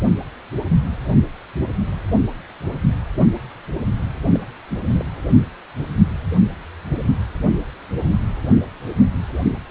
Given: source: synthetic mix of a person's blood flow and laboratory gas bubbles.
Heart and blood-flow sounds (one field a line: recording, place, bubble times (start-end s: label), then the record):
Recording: Doppler ultrasound of blood flow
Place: precordium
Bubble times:
4.34-4.38 s: bubbles
4.69-4.79 s: bubbles
4.87-5.03 s: bubbles
From the record:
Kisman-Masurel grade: 221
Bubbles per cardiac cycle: several, 3 to 8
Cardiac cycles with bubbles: 10 to 50%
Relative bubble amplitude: barely perceptible (0.100 to 0.250)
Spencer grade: 2 (many but less than half of the cardiac periods contain bubble signals, singularly or in groups)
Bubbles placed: anywhere in the cardiac cycle